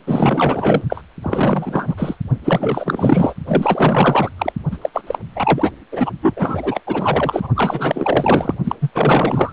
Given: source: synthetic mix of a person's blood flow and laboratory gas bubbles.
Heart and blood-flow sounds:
Doppler ultrasound of blood flow; precordium
0.07-0.81 s: bubbles
0.89-1.01 s: bubbles
1.21-2.16 s: bubbles
2.43-3.33 s: bubbles
3.46-4.30 s: bubbles
4.38-4.53 s: bubbles
4.71-4.78 s: bubbles
4.82-4.90 s: bubbles
4.93-5.02 s: bubbles
5.07-5.19 s: bubbles
5.35-5.71 s: bubbles
5.92-6.11 s: bubbles
6.22-6.81 s: bubbles
6.87-7.48 s: bubbles
7.54-8.54 s: bubbles
8.64-8.76 s: bubbles
8.80-8.90 s: bubbles
8.94-9.53 s: bubbles
From the record:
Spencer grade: 4 (maximum detectable bubble signal sounding continuously throughout systole and diastole of every cardiac period, and overriding the amplitude of the normal cardiac signals); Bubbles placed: only in the low amplitude regions of the cardiac cycle

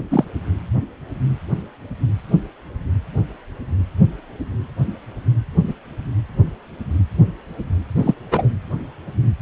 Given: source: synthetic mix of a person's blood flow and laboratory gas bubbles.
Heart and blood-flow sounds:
Doppler ultrasound of blood flow; precordium
0.11-0.24 s: bubbles
5.67-5.74 s: bubbles
7.95-8.14 s: bubbles
8.31-8.49 s: bubbles
From the record:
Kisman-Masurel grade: 123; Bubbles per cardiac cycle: 1 to 2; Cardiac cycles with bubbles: 10 to 50%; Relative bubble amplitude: loud (0.450 to 0.775); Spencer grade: 2 (many but less than half of the cardiac periods contain bubble signals, singularly or in groups); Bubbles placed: anywhere in the cardiac cycle

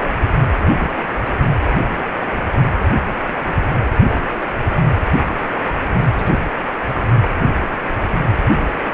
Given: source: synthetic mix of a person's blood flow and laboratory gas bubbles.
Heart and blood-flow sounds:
Doppler ultrasound of blood flow; precordium
0.54-0.93 s: bubbles
1.25-1.29 s: bubbles
4.04-4.27 s: bubbles
4.85-4.88 s: bubbles
6.16-6.31 s: bubbles
7.41-7.51 s: bubbles
7.61-7.68 s: bubbles
From the record:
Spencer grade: 2 (many but less than half of the cardiac periods contain bubble signals, singularly or in groups); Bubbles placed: anywhere in the cardiac cycle

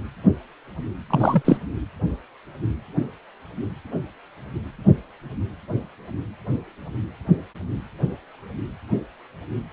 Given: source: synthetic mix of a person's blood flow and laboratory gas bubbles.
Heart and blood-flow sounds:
Doppler ultrasound of blood flow; precordium
1.10-1.57 s: bubbles
From the record:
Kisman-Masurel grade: 223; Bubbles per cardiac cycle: several, 3 to 8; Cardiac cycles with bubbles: 10 to 50%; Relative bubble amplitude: loud (0.450 to 0.775); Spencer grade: 2 (many but less than half of the cardiac periods contain bubble signals, singularly or in groups); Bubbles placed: anywhere in the cardiac cycle

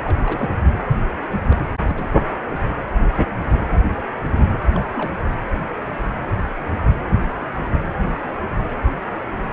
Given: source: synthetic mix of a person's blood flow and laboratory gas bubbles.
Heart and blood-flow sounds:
Doppler ultrasound of blood flow; precordium
0.04-0.55 s: bubbles
1.44-1.71 s: bubbles
1.88-2.11 s: bubbles
2.23-2.32 s: bubbles
4.28-4.44 s: bubbles
4.66-4.87 s: bubbles
4.91-5.15 s: bubbles
From the record:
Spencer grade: 2 (many but less than half of the cardiac periods contain bubble signals, singularly or in groups); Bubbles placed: anywhere in the cardiac cycle

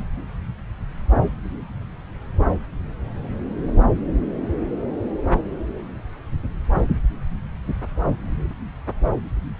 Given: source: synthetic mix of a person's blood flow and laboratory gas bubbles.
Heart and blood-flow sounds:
Doppler ultrasound of blood flow; subclavian vein
8.50-8.54 s: bubbles
From the record:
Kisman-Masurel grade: 111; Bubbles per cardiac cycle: 1 to 2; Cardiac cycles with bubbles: 1 to 10%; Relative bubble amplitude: barely perceptible (0.100 to 0.250); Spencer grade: 1 (occasional bubble signal discernible with the cardiac motion signal, with majority of cardiac periods free of bubbles); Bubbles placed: anywhere in the cardiac cycle

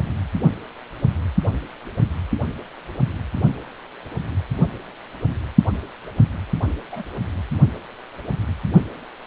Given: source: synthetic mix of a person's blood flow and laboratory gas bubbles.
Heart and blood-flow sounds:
Doppler ultrasound of blood flow; precordium
6.92-7.03 s: bubbles
From the record:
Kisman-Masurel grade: 111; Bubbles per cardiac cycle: 1 to 2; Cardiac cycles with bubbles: 1 to 10%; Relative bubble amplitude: barely perceptible (0.100 to 0.250); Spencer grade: 1 (occasional bubble signal discernible with the cardiac motion signal, with majority of cardiac periods free of bubbles); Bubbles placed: only in the low amplitude regions of the cardiac cycle

